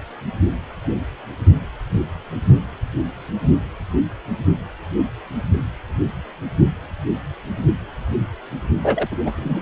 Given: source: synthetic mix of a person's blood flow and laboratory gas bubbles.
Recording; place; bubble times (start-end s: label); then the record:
Doppler ultrasound of blood flow; precordium
8.83-9.08 s: bubbles
9.11-9.15 s: bubbles
9.25-9.32 s: bubbles
9.36-9.61 s: bubbles
From the record:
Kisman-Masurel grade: 212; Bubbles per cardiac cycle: several, 3 to 8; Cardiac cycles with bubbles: 1 to 10%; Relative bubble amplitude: moderate (0.250 to 0.450); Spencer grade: 1 (occasional bubble signal discernible with the cardiac motion signal, with majority of cardiac periods free of bubbles); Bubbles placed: only in the low amplitude regions of the cardiac cycle